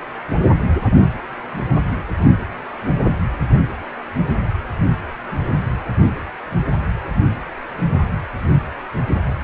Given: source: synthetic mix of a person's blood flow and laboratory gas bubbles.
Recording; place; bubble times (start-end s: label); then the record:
Doppler ultrasound of blood flow; precordium
no bubbles
From the record:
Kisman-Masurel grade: 000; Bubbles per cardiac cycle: 0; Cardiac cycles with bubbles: 0%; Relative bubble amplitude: no bubbles discernible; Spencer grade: 0 (complete lack of bubble signals)